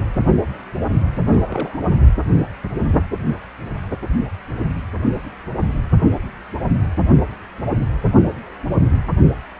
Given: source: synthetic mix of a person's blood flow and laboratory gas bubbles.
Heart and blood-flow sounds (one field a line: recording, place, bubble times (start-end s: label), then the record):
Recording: Doppler ultrasound of blood flow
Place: precordium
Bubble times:
1.31-1.81 s: bubbles
From the record:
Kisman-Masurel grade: 211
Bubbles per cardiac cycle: several, 3 to 8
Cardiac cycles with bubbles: 1 to 10%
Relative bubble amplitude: barely perceptible (0.100 to 0.250)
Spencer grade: 1 (occasional bubble signal discernible with the cardiac motion signal, with majority of cardiac periods free of bubbles)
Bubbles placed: anywhere in the cardiac cycle